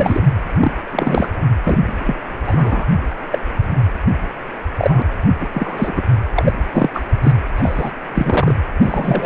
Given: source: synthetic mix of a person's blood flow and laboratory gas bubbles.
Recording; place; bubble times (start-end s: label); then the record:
Doppler ultrasound of blood flow; precordium
0.00-0.22 s: bubbles
0.50-0.53 s: bubbles
0.60-0.71 s: bubbles
0.90-1.28 s: bubbles
1.64-1.78 s: bubbles
1.85-2.16 s: bubbles
2.44-2.87 s: bubbles
3.32-3.39 s: bubbles
4.77-5.02 s: bubbles
5.40-5.48 s: bubbles
5.53-6.02 s: bubbles
6.37-6.53 s: bubbles
6.71-6.90 s: bubbles
6.94-7.04 s: bubbles
7.23-7.33 s: bubbles
7.57-7.92 s: bubbles
8.14-8.54 s: bubbles
8.80-9.26 s: bubbles
From the record:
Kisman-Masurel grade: 243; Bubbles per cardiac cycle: several, 3 to 8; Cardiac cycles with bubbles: 100%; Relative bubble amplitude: loud (0.450 to 0.775); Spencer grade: 3 (all of the cardiac periods contain showers or single bubble signals, but not dominating or overriding the cardiac motion signals); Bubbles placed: anywhere in the cardiac cycle